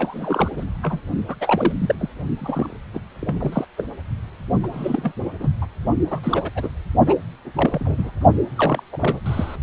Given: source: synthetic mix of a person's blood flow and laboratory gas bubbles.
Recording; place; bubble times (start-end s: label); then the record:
Doppler ultrasound of blood flow; precordium
0.00-0.49 s: bubbles
0.56-0.65 s: bubbles
0.82-0.99 s: bubbles
1.28-1.35 s: bubbles
1.41-1.73 s: bubbles
1.78-1.96 s: bubbles
1.99-2.08 s: bubbles
2.38-2.76 s: bubbles
2.93-3.00 s: bubbles
3.19-3.65 s: bubbles
3.77-3.84 s: bubbles
4.63-4.68 s: bubbles
4.72-5.12 s: bubbles
5.39-5.49 s: bubbles
5.62-5.67 s: bubbles
6.10-6.20 s: bubbles
6.23-6.50 s: bubbles
6.55-6.69 s: bubbles
7.07-7.17 s: bubbles
7.55-8.12 s: bubbles
8.55-8.83 s: bubbles
8.92-9.20 s: bubbles
9.25-9.56 s: bubbles
From the record:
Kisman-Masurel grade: 242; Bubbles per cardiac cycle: several, 3 to 8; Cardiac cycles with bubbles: 100%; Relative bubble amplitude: moderate (0.250 to 0.450); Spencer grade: 3 (all of the cardiac periods contain showers or single bubble signals, but not dominating or overriding the cardiac motion signals); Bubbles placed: only in the low amplitude regions of the cardiac cycle